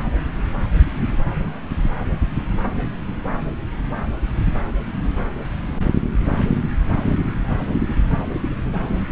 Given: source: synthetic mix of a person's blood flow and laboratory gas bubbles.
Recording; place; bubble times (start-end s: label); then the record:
Doppler ultrasound of blood flow; subclavian vein
no bubbles
From the record:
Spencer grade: 0 (complete lack of bubble signals)